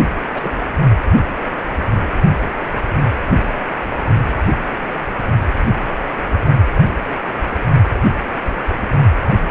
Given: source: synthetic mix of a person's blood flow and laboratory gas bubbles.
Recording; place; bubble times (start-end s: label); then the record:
Doppler ultrasound of blood flow; precordium
0.34-0.52 s: bubbles
From the record:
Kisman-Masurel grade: 112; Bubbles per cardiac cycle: 1 to 2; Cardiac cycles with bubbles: 1 to 10%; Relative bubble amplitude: moderate (0.250 to 0.450); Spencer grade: 1 (occasional bubble signal discernible with the cardiac motion signal, with majority of cardiac periods free of bubbles); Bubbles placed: only in the low amplitude regions of the cardiac cycle